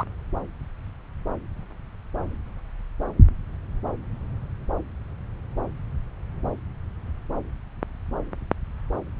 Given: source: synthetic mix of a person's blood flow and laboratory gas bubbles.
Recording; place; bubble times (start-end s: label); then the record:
Doppler ultrasound of blood flow; subclavian vein
0.00-0.04 s: bubbles
From the record:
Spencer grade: 2 (many but less than half of the cardiac periods contain bubble signals, singularly or in groups); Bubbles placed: anywhere in the cardiac cycle